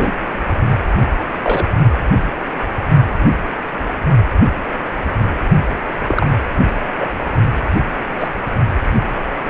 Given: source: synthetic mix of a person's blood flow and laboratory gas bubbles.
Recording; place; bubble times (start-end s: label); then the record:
Doppler ultrasound of blood flow; precordium
0.00-0.12 s: bubbles
1.43-1.65 s: bubbles
6.08-6.26 s: bubbles
7.00-7.11 s: bubbles
8.20-8.29 s: bubbles
From the record:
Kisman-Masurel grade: 123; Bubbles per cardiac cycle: 1 to 2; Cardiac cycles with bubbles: 10 to 50%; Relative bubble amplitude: loud (0.450 to 0.775); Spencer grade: 2 (many but less than half of the cardiac periods contain bubble signals, singularly or in groups); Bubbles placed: only in the low amplitude regions of the cardiac cycle